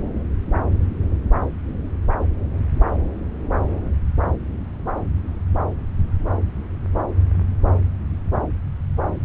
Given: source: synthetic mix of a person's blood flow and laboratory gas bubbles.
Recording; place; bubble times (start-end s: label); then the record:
Doppler ultrasound of blood flow; subclavian vein
no bubbles
From the record:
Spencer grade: 0 (complete lack of bubble signals)